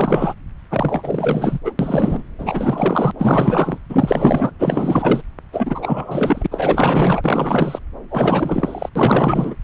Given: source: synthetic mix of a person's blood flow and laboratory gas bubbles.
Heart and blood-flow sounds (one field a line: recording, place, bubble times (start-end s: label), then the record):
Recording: Doppler ultrasound of blood flow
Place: subclavian vein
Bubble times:
0.00-0.36 s: bubbles
0.70-1.59 s: bubbles
1.64-1.72 s: bubbles
1.79-2.23 s: bubbles
2.38-3.12 s: bubbles
3.19-3.78 s: bubbles
3.89-4.51 s: bubbles
4.59-5.21 s: bubbles
5.52-6.46 s: bubbles
6.51-7.79 s: bubbles
8.10-8.89 s: bubbles
8.95-9.55 s: bubbles
From the record:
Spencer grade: 4 (maximum detectable bubble signal sounding continuously throughout systole and diastole of every cardiac period, and overriding the amplitude of the normal cardiac signals)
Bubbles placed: anywhere in the cardiac cycle